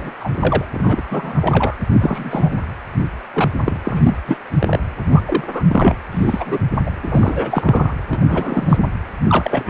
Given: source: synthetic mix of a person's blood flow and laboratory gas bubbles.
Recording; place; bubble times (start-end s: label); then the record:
Doppler ultrasound of blood flow; precordium
0.00-0.13 s: bubbles
0.20-0.30 s: bubbles
0.33-0.65 s: bubbles
0.74-1.02 s: bubbles
1.10-1.75 s: bubbles
1.91-2.60 s: bubbles
3.33-3.50 s: bubbles
3.65-3.80 s: bubbles
3.85-4.17 s: bubbles
4.26-4.37 s: bubbles
4.59-4.79 s: bubbles
5.11-5.64 s: bubbles
5.69-5.95 s: bubbles
6.12-6.58 s: bubbles
6.86-6.90 s: bubbles
7.03-7.93 s: bubbles
8.09-8.85 s: bubbles
9.28-9.70 s: bubbles
From the record:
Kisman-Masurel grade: 242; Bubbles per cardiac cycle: several, 3 to 8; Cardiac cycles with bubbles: 100%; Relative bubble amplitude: moderate (0.250 to 0.450); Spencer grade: 3 (all of the cardiac periods contain showers or single bubble signals, but not dominating or overriding the cardiac motion signals); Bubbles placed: anywhere in the cardiac cycle